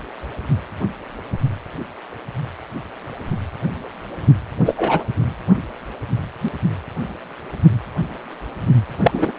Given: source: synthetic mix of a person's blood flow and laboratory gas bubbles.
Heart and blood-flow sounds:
Doppler ultrasound of blood flow; precordium
4.65-5.04 s: bubbles
9.00-9.32 s: bubbles
From the record:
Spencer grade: 2 (many but less than half of the cardiac periods contain bubble signals, singularly or in groups); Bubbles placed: only in the low amplitude regions of the cardiac cycle

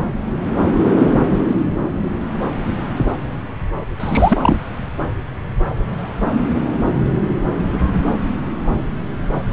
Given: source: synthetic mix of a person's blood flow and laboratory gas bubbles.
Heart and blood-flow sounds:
Doppler ultrasound of blood flow; subclavian vein
3.99-4.66 s: bubbles
From the record:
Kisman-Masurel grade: 213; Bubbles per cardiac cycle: several, 3 to 8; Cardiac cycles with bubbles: 1 to 10%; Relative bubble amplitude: loud (0.450 to 0.775); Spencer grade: 1 (occasional bubble signal discernible with the cardiac motion signal, with majority of cardiac periods free of bubbles); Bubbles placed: anywhere in the cardiac cycle

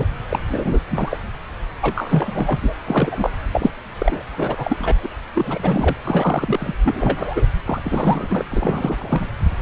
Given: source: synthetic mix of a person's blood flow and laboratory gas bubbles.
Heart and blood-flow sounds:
Doppler ultrasound of blood flow; subclavian vein
0.00-0.05 s: bubbles
0.29-0.39 s: bubbles
0.47-0.80 s: bubbles
0.90-1.19 s: bubbles
1.82-2.73 s: bubbles
2.85-3.30 s: bubbles
3.52-3.71 s: bubbles
3.99-4.22 s: bubbles
4.37-4.94 s: bubbles
5.03-5.09 s: bubbles
5.34-5.96 s: bubbles
6.03-6.75 s: bubbles
6.83-7.46 s: bubbles
7.65-7.80 s: bubbles
7.85-8.45 s: bubbles
8.51-9.29 s: bubbles
From the record:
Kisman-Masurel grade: 342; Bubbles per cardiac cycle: rolling drumbeat, 9 or more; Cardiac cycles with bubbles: 100%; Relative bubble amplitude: moderate (0.250 to 0.450); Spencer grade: 3 (all of the cardiac periods contain showers or single bubble signals, but not dominating or overriding the cardiac motion signals); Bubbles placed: anywhere in the cardiac cycle

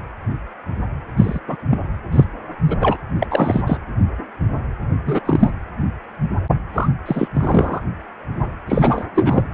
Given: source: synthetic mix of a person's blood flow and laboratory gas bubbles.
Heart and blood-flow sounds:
Doppler ultrasound of blood flow; precordium
1.17-1.40 s: bubbles
1.47-1.56 s: bubbles
1.69-1.79 s: bubbles
2.12-2.25 s: bubbles
2.67-2.77 s: bubbles
2.80-2.98 s: bubbles
3.19-3.27 s: bubbles
3.30-3.62 s: bubbles
3.67-3.79 s: bubbles
5.06-5.20 s: bubbles
5.25-5.50 s: bubbles
6.74-6.89 s: bubbles
7.06-7.29 s: bubbles
7.34-7.81 s: bubbles
8.68-9.05 s: bubbles
9.14-9.44 s: bubbles
From the record:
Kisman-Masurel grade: 233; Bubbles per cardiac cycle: several, 3 to 8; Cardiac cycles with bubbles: 50 to 99%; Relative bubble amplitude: loud (0.450 to 0.775); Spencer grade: 3 (all of the cardiac periods contain showers or single bubble signals, but not dominating or overriding the cardiac motion signals); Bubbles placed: anywhere in the cardiac cycle

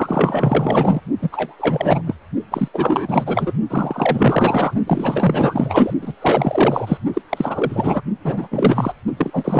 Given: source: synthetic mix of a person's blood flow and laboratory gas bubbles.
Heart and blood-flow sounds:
Doppler ultrasound of blood flow; precordium
0.00-1.01 s: bubbles
1.22-1.30 s: bubbles
1.32-2.02 s: bubbles
2.06-2.15 s: bubbles
2.51-2.68 s: bubbles
2.73-3.52 s: bubbles
3.70-4.74 s: bubbles
4.86-5.94 s: bubbles
6.01-6.12 s: bubbles
6.21-6.97 s: bubbles
7.13-7.21 s: bubbles
7.29-8.02 s: bubbles
8.23-8.48 s: bubbles
8.51-8.94 s: bubbles
9.17-9.60 s: bubbles
From the record:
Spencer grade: 4 (maximum detectable bubble signal sounding continuously throughout systole and diastole of every cardiac period, and overriding the amplitude of the normal cardiac signals); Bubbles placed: only in the low amplitude regions of the cardiac cycle

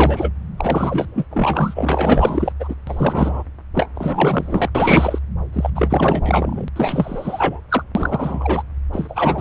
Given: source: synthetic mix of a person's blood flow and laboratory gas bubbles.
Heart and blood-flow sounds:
Doppler ultrasound of blood flow; subclavian vein
0.00-0.30 s: bubbles
0.57-1.25 s: bubbles
1.30-2.52 s: bubbles
2.59-2.75 s: bubbles
2.87-3.43 s: bubbles
3.74-3.89 s: bubbles
3.95-4.69 s: bubbles
4.75-5.18 s: bubbles
5.52-5.70 s: bubbles
5.75-6.65 s: bubbles
6.75-7.60 s: bubbles
7.68-7.83 s: bubbles
7.95-8.62 s: bubbles
8.93-9.41 s: bubbles
From the record:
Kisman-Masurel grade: 444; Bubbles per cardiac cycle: continuous sound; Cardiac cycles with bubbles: 100%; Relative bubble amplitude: maximal (0.775 to 0.999); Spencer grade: 4 (maximum detectable bubble signal sounding continuously throughout systole and diastole of every cardiac period, and overriding the amplitude of the normal cardiac signals); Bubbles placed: anywhere in the cardiac cycle

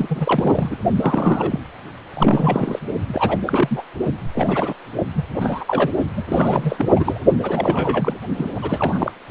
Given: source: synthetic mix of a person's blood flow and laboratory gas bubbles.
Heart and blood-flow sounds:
Doppler ultrasound of blood flow; precordium
0.00-0.76 s: bubbles
0.96-1.59 s: bubbles
2.13-2.79 s: bubbles
3.07-3.38 s: bubbles
3.46-3.83 s: bubbles
4.35-4.75 s: bubbles
5.16-5.24 s: bubbles
5.40-5.64 s: bubbles
5.67-5.91 s: bubbles
6.17-6.23 s: bubbles
6.29-7.19 s: bubbles
7.42-8.14 s: bubbles
8.37-8.50 s: bubbles
8.55-9.12 s: bubbles
From the record:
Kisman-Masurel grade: 342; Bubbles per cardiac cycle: rolling drumbeat, 9 or more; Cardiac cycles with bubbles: 100%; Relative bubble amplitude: moderate (0.250 to 0.450); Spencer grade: 3 (all of the cardiac periods contain showers or single bubble signals, but not dominating or overriding the cardiac motion signals); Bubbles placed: only in the low amplitude regions of the cardiac cycle

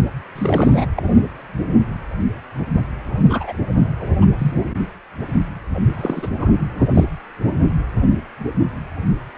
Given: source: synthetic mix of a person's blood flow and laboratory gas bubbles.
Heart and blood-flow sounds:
Doppler ultrasound of blood flow; precordium
0.35-0.86 s: bubbles
0.96-1.02 s: bubbles
3.29-3.53 s: bubbles
3.99-4.16 s: bubbles
4.21-4.26 s: bubbles
4.38-4.54 s: bubbles
5.94-6.29 s: bubbles
6.39-6.49 s: bubbles
6.78-6.88 s: bubbles
6.94-7.04 s: bubbles
From the record:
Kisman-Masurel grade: 222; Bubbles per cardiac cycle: several, 3 to 8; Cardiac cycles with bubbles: 10 to 50%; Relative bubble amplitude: moderate (0.250 to 0.450); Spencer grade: 2 (many but less than half of the cardiac periods contain bubble signals, singularly or in groups); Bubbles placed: only in the low amplitude regions of the cardiac cycle

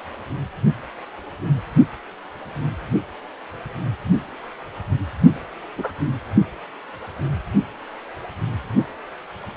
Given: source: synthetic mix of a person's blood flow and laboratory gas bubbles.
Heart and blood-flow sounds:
Doppler ultrasound of blood flow; precordium
5.78-5.92 s: bubbles
From the record:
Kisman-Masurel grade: 112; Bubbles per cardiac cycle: 1 to 2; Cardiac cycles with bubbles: 1 to 10%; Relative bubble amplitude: moderate (0.250 to 0.450); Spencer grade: 1 (occasional bubble signal discernible with the cardiac motion signal, with majority of cardiac periods free of bubbles); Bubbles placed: only in the low amplitude regions of the cardiac cycle

